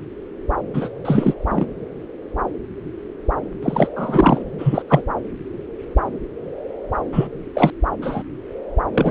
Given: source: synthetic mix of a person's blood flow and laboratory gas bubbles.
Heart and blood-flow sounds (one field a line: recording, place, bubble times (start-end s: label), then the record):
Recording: Doppler ultrasound of blood flow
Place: subclavian vein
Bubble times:
0.74-0.90 s: bubbles
1.05-1.34 s: bubbles
1.50-1.67 s: bubbles
3.62-3.89 s: bubbles
3.95-4.43 s: bubbles
4.58-4.82 s: bubbles
4.88-5.03 s: bubbles
7.12-7.27 s: bubbles
7.54-7.71 s: bubbles
8.02-8.22 s: bubbles
8.94-9.11 s: bubbles
From the record:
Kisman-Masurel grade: 223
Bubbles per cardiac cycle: several, 3 to 8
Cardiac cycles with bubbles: 10 to 50%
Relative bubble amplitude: loud (0.450 to 0.775)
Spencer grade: 2 (many but less than half of the cardiac periods contain bubble signals, singularly or in groups)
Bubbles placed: anywhere in the cardiac cycle